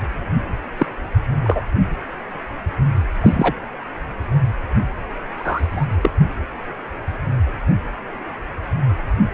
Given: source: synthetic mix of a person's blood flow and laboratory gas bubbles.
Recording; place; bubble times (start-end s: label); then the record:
Doppler ultrasound of blood flow; precordium
0.78-0.86 s: bubbles
1.44-1.61 s: bubbles
3.21-3.54 s: bubbles
5.37-5.86 s: bubbles
6.01-6.10 s: bubbles
From the record:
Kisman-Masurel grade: 123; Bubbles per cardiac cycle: 1 to 2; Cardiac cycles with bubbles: 10 to 50%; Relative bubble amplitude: loud (0.450 to 0.775); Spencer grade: 2 (many but less than half of the cardiac periods contain bubble signals, singularly or in groups); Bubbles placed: anywhere in the cardiac cycle